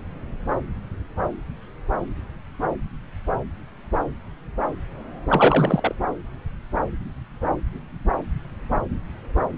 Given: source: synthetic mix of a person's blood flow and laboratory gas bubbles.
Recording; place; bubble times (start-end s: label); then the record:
Doppler ultrasound of blood flow; subclavian vein
5.28-5.95 s: bubbles
From the record:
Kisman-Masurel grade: 212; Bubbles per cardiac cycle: several, 3 to 8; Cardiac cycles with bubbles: 1 to 10%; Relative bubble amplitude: moderate (0.250 to 0.450); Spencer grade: 1 (occasional bubble signal discernible with the cardiac motion signal, with majority of cardiac periods free of bubbles); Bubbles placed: anywhere in the cardiac cycle